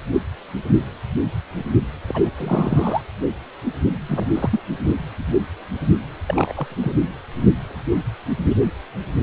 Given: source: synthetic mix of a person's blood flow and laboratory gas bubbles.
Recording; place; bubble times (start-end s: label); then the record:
Doppler ultrasound of blood flow; precordium
2.06-2.31 s: bubbles
2.37-3.02 s: bubbles
4.08-4.59 s: bubbles
4.84-4.93 s: bubbles
6.27-6.52 s: bubbles
6.55-6.75 s: bubbles
6.81-6.98 s: bubbles
From the record:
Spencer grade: 2 (many but less than half of the cardiac periods contain bubble signals, singularly or in groups); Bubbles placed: anywhere in the cardiac cycle